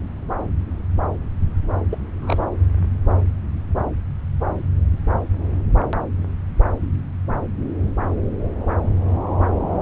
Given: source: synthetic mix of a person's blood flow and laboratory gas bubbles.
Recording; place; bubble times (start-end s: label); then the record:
Doppler ultrasound of blood flow; subclavian vein
1.91-1.98 s: bubbles
2.20-2.48 s: bubbles
From the record:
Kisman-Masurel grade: 211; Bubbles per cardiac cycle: several, 3 to 8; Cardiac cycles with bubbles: 1 to 10%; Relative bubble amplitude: barely perceptible (0.100 to 0.250); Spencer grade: 1 (occasional bubble signal discernible with the cardiac motion signal, with majority of cardiac periods free of bubbles); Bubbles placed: anywhere in the cardiac cycle